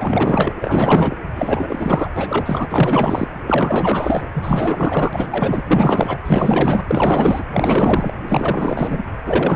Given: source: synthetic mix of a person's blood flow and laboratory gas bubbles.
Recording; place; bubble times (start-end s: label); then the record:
Doppler ultrasound of blood flow; precordium
0.00-0.52 s: bubbles
0.61-1.15 s: bubbles
1.35-2.08 s: bubbles
2.16-2.68 s: bubbles
2.71-3.27 s: bubbles
3.47-4.29 s: bubbles
4.33-5.26 s: bubbles
5.31-5.62 s: bubbles
5.67-6.18 s: bubbles
6.25-6.84 s: bubbles
6.87-7.46 s: bubbles
7.53-8.13 s: bubbles
8.28-9.00 s: bubbles
9.26-9.56 s: bubbles
From the record:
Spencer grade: 4 (maximum detectable bubble signal sounding continuously throughout systole and diastole of every cardiac period, and overriding the amplitude of the normal cardiac signals); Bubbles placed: anywhere in the cardiac cycle